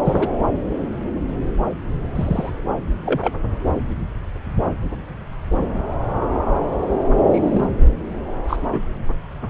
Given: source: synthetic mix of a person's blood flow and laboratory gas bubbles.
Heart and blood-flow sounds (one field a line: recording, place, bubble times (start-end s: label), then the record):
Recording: Doppler ultrasound of blood flow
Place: subclavian vein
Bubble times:
0.05-0.29 s: bubbles
2.16-2.50 s: bubbles
3.06-3.32 s: bubbles
5.58-5.82 s: bubbles
7.30-7.67 s: bubbles
8.47-8.56 s: bubbles
8.72-8.82 s: bubbles
From the record:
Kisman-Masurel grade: 122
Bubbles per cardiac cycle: 1 to 2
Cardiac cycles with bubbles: 10 to 50%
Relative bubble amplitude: moderate (0.250 to 0.450)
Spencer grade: 2 (many but less than half of the cardiac periods contain bubble signals, singularly or in groups)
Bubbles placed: anywhere in the cardiac cycle